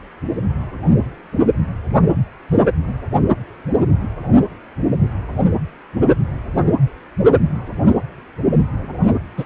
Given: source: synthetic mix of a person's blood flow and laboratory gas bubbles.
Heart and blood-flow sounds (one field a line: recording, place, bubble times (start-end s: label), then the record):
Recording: Doppler ultrasound of blood flow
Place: precordium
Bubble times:
9.37-9.45 s: bubbles
From the record:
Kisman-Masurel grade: 123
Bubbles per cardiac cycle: 1 to 2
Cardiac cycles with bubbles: 10 to 50%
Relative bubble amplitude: loud (0.450 to 0.775)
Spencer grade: 2 (many but less than half of the cardiac periods contain bubble signals, singularly or in groups)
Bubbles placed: only in the low amplitude regions of the cardiac cycle